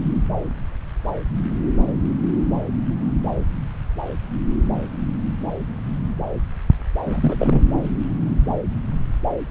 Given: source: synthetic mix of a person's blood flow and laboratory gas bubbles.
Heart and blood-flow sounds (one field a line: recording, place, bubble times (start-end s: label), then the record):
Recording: Doppler ultrasound of blood flow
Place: subclavian vein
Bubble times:
7.05-7.63 s: bubbles
From the record:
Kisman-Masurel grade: 212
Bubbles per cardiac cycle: several, 3 to 8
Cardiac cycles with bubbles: 1 to 10%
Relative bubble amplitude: moderate (0.250 to 0.450)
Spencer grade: 1 (occasional bubble signal discernible with the cardiac motion signal, with majority of cardiac periods free of bubbles)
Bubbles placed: anywhere in the cardiac cycle